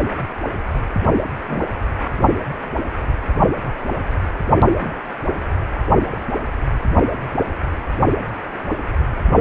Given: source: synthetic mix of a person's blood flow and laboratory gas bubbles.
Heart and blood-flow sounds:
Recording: Doppler ultrasound of blood flow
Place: precordium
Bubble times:
0.04-0.10 s: bubbles
1.48-1.65 s: bubbles
4.82-4.90 s: bubbles
6.12-6.17 s: bubbles
From the record:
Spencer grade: 2 (many but less than half of the cardiac periods contain bubble signals, singularly or in groups)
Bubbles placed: anywhere in the cardiac cycle

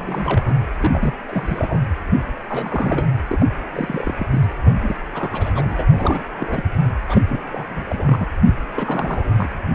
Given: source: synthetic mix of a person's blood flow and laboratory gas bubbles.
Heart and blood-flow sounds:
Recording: Doppler ultrasound of blood flow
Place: precordium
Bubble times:
0.00-0.54 s: bubbles
0.79-1.15 s: bubbles
1.28-1.80 s: bubbles
2.50-3.06 s: bubbles
3.29-3.47 s: bubbles
3.73-4.15 s: bubbles
4.19-4.27 s: bubbles
4.31-4.45 s: bubbles
4.65-4.96 s: bubbles
5.11-5.85 s: bubbles
5.91-6.25 s: bubbles
6.37-6.65 s: bubbles
7.08-7.21 s: bubbles
7.29-7.39 s: bubbles
7.52-7.84 s: bubbles
7.89-8.26 s: bubbles
8.76-9.48 s: bubbles
From the record:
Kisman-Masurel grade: 342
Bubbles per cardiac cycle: rolling drumbeat, 9 or more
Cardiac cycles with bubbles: 100%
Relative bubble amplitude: moderate (0.250 to 0.450)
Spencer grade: 3 (all of the cardiac periods contain showers or single bubble signals, but not dominating or overriding the cardiac motion signals)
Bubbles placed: anywhere in the cardiac cycle

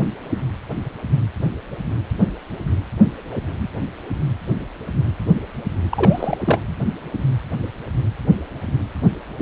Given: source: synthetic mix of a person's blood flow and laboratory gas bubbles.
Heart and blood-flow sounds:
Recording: Doppler ultrasound of blood flow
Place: precordium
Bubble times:
5.91-6.38 s: bubbles
6.45-6.60 s: bubbles
From the record:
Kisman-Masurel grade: 212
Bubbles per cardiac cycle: several, 3 to 8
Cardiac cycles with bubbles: 1 to 10%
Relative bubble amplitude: moderate (0.250 to 0.450)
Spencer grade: 1 (occasional bubble signal discernible with the cardiac motion signal, with majority of cardiac periods free of bubbles)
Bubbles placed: anywhere in the cardiac cycle

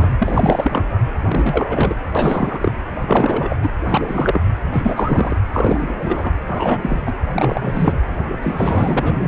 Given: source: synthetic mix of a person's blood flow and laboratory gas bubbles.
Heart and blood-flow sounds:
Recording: Doppler ultrasound of blood flow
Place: precordium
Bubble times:
0.00-0.13 s: bubbles
0.19-1.00 s: bubbles
1.23-1.95 s: bubbles
2.15-2.72 s: bubbles
3.01-3.57 s: bubbles
3.63-3.70 s: bubbles
3.89-4.41 s: bubbles
4.72-5.37 s: bubbles
5.53-5.93 s: bubbles
6.01-6.30 s: bubbles
6.49-6.78 s: bubbles
6.81-7.01 s: bubbles
7.05-7.12 s: bubbles
7.33-7.98 s: bubbles
8.42-9.28 s: bubbles
From the record:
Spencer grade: 3 (all of the cardiac periods contain showers or single bubble signals, but not dominating or overriding the cardiac motion signals)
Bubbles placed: anywhere in the cardiac cycle

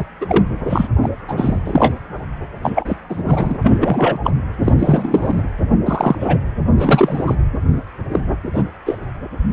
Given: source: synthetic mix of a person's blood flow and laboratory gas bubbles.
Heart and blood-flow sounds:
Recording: Doppler ultrasound of blood flow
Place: precordium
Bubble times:
0.00-0.04 s: bubbles
0.21-0.26 s: bubbles
0.29-0.45 s: bubbles
0.70-0.88 s: bubbles
1.02-1.09 s: bubbles
1.28-1.59 s: bubbles
1.65-1.95 s: bubbles
2.63-2.96 s: bubbles
3.09-3.58 s: bubbles
3.62-3.77 s: bubbles
3.80-4.19 s: bubbles
4.24-4.30 s: bubbles
4.64-4.72 s: bubbles
4.79-5.42 s: bubbles
5.85-6.15 s: bubbles
6.20-6.38 s: bubbles
6.75-7.35 s: bubbles
8.12-8.21 s: bubbles
8.53-8.63 s: bubbles
8.86-8.97 s: bubbles
From the record:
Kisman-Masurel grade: 243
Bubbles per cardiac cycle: several, 3 to 8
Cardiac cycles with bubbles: 100%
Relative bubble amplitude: loud (0.450 to 0.775)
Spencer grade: 3 (all of the cardiac periods contain showers or single bubble signals, but not dominating or overriding the cardiac motion signals)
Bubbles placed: anywhere in the cardiac cycle

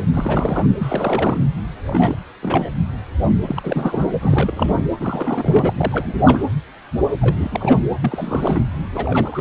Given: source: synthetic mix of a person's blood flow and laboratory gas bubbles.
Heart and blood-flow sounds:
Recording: Doppler ultrasound of blood flow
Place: precordium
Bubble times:
0.00-0.05 s: bubbles
0.14-0.67 s: bubbles
0.79-1.39 s: bubbles
1.84-2.19 s: bubbles
2.42-2.70 s: bubbles
3.47-4.06 s: bubbles
4.21-4.73 s: bubbles
4.77-4.85 s: bubbles
5.00-5.74 s: bubbles
5.77-6.43 s: bubbles
7.21-7.48 s: bubbles
7.51-7.82 s: bubbles
8.01-8.62 s: bubbles
8.94-9.41 s: bubbles
From the record:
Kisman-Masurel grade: 332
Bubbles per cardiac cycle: rolling drumbeat, 9 or more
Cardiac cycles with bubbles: 50 to 99%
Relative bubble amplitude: moderate (0.250 to 0.450)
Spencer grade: 3 (all of the cardiac periods contain showers or single bubble signals, but not dominating or overriding the cardiac motion signals)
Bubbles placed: anywhere in the cardiac cycle

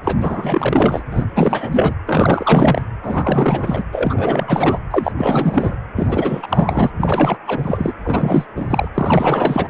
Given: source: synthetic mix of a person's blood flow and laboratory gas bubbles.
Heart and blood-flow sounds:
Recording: Doppler ultrasound of blood flow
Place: precordium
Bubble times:
0.04-1.03 s: bubbles
1.11-1.25 s: bubbles
1.35-1.95 s: bubbles
2.06-2.81 s: bubbles
3.02-3.83 s: bubbles
3.92-4.78 s: bubbles
4.90-5.12 s: bubbles
5.18-5.77 s: bubbles
5.96-6.90 s: bubbles
6.97-7.37 s: bubbles
7.47-7.93 s: bubbles
8.04-8.46 s: bubbles
8.56-8.88 s: bubbles
8.94-9.68 s: bubbles
From the record:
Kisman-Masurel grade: 444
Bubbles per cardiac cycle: continuous sound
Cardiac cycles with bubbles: 100%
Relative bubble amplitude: maximal (0.775 to 0.999)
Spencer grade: 4 (maximum detectable bubble signal sounding continuously throughout systole and diastole of every cardiac period, and overriding the amplitude of the normal cardiac signals)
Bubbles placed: anywhere in the cardiac cycle

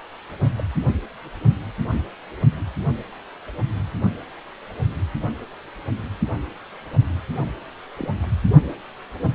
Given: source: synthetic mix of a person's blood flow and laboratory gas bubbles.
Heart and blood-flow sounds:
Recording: Doppler ultrasound of blood flow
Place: precordium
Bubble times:
0.44-0.64 s: bubbles
7.98-8.08 s: bubbles
8.22-8.26 s: bubbles
From the record:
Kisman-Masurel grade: 121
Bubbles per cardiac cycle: 1 to 2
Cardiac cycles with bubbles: 10 to 50%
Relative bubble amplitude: barely perceptible (0.100 to 0.250)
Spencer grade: 2 (many but less than half of the cardiac periods contain bubble signals, singularly or in groups)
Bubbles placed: only in the low amplitude regions of the cardiac cycle

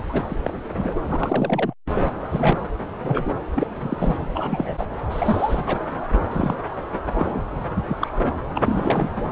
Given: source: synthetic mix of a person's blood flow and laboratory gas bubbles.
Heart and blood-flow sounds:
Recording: Doppler ultrasound of blood flow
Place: subclavian vein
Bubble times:
0.00-0.02 s: bubbles
0.09-0.22 s: bubbles
0.28-0.35 s: bubbles
0.43-0.54 s: bubbles
0.74-1.00 s: bubbles
1.06-1.73 s: bubbles
1.95-2.06 s: bubbles
2.30-2.77 s: bubbles
3.02-3.31 s: bubbles
3.56-3.67 s: bubbles
3.80-4.26 s: bubbles
4.33-4.75 s: bubbles
4.78-4.86 s: bubbles
5.11-5.80 s: bubbles
6.30-6.55 s: bubbles
7.14-7.43 s: bubbles
7.88-7.97 s: bubbles
8.01-8.18 s: bubbles
8.21-8.38 s: bubbles
8.54-9.10 s: bubbles
9.17-9.22 s: bubbles
From the record:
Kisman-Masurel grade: 242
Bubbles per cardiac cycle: several, 3 to 8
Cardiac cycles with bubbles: 100%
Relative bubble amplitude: moderate (0.250 to 0.450)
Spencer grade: 3 (all of the cardiac periods contain showers or single bubble signals, but not dominating or overriding the cardiac motion signals)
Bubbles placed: anywhere in the cardiac cycle

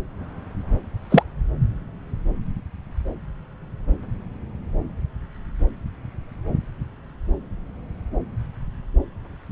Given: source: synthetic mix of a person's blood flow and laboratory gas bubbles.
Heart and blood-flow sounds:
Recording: Doppler ultrasound of blood flow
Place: subclavian vein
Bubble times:
1.10-1.23 s: bubbles
From the record:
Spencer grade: 2 (many but less than half of the cardiac periods contain bubble signals, singularly or in groups)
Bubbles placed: anywhere in the cardiac cycle

